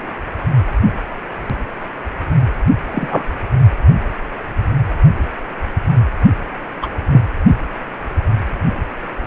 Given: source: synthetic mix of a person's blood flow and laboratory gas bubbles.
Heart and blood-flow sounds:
Doppler ultrasound of blood flow; precordium
2.87-3.25 s: bubbles
6.82-6.88 s: bubbles
7.10-7.21 s: bubbles
From the record:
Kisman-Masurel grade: 123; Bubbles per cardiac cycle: 1 to 2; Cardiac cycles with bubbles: 10 to 50%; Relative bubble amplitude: loud (0.450 to 0.775); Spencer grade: 2 (many but less than half of the cardiac periods contain bubble signals, singularly or in groups); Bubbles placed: only in the low amplitude regions of the cardiac cycle

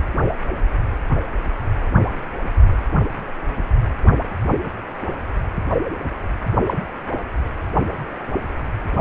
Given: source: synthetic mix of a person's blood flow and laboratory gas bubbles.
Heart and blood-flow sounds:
Doppler ultrasound of blood flow; precordium
6.66-6.74 s: bubbles
From the record:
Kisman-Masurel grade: 112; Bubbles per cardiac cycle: 1 to 2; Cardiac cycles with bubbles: 1 to 10%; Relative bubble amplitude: moderate (0.250 to 0.450); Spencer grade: 1 (occasional bubble signal discernible with the cardiac motion signal, with majority of cardiac periods free of bubbles); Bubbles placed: only in the low amplitude regions of the cardiac cycle

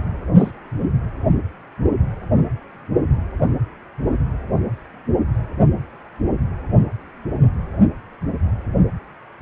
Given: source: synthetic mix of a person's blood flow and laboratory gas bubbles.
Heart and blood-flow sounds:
Doppler ultrasound of blood flow; precordium
0.34-0.51 s: bubbles
From the record:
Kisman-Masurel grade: 112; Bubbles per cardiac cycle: 1 to 2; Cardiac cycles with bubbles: 1 to 10%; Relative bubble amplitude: moderate (0.250 to 0.450); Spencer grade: 1 (occasional bubble signal discernible with the cardiac motion signal, with majority of cardiac periods free of bubbles); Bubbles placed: anywhere in the cardiac cycle

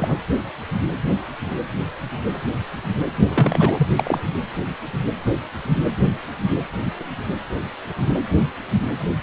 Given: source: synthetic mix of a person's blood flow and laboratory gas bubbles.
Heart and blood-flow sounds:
Doppler ultrasound of blood flow; precordium
0.00-0.16 s: bubbles
3.29-3.87 s: bubbles
3.96-4.20 s: bubbles
From the record:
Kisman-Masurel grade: 222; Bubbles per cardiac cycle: several, 3 to 8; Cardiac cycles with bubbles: 10 to 50%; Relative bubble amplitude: moderate (0.250 to 0.450); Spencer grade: 2 (many but less than half of the cardiac periods contain bubble signals, singularly or in groups); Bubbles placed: only in the low amplitude regions of the cardiac cycle

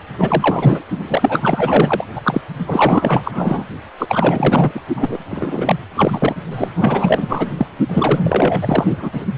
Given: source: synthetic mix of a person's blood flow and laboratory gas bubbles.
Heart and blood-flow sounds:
Doppler ultrasound of blood flow; precordium
0.18-0.82 s: bubbles
0.99-2.04 s: bubbles
2.15-2.21 s: bubbles
2.24-2.42 s: bubbles
2.67-3.65 s: bubbles
3.98-4.06 s: bubbles
4.08-4.81 s: bubbles
4.95-5.17 s: bubbles
5.30-5.76 s: bubbles
5.94-6.35 s: bubbles
6.50-6.71 s: bubbles
6.76-7.51 s: bubbles
7.58-7.67 s: bubbles
7.89-8.20 s: bubbles
8.23-9.26 s: bubbles
From the record:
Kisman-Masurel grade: 444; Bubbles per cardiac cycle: continuous sound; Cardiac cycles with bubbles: 100%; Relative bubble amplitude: maximal (0.775 to 0.999); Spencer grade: 4 (maximum detectable bubble signal sounding continuously throughout systole and diastole of every cardiac period, and overriding the amplitude of the normal cardiac signals); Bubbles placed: only in the low amplitude regions of the cardiac cycle

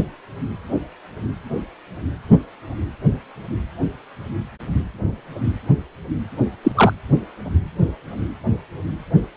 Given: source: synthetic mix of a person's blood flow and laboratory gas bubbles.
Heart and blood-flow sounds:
Doppler ultrasound of blood flow; precordium
6.63-6.72 s: bubbles
6.75-6.93 s: bubbles
From the record:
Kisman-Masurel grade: 213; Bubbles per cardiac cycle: several, 3 to 8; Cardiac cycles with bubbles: 1 to 10%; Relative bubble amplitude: loud (0.450 to 0.775); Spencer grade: 1 (occasional bubble signal discernible with the cardiac motion signal, with majority of cardiac periods free of bubbles); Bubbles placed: anywhere in the cardiac cycle

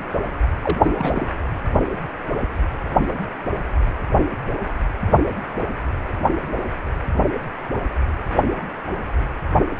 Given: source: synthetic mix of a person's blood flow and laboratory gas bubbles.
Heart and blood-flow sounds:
Doppler ultrasound of blood flow; precordium
0.62-0.78 s: bubbles
0.82-1.28 s: bubbles
From the record:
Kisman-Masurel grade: 222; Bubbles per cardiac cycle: several, 3 to 8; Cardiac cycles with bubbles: 10 to 50%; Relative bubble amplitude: moderate (0.250 to 0.450); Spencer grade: 2 (many but less than half of the cardiac periods contain bubble signals, singularly or in groups); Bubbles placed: anywhere in the cardiac cycle

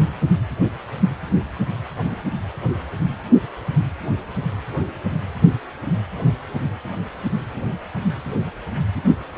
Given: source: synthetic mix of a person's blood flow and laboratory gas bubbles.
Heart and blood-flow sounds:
Doppler ultrasound of blood flow; precordium
no bubbles
From the record:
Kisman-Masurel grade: 000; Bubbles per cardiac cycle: 0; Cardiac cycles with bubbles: 0%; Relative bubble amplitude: no bubbles discernible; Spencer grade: 0 (complete lack of bubble signals)

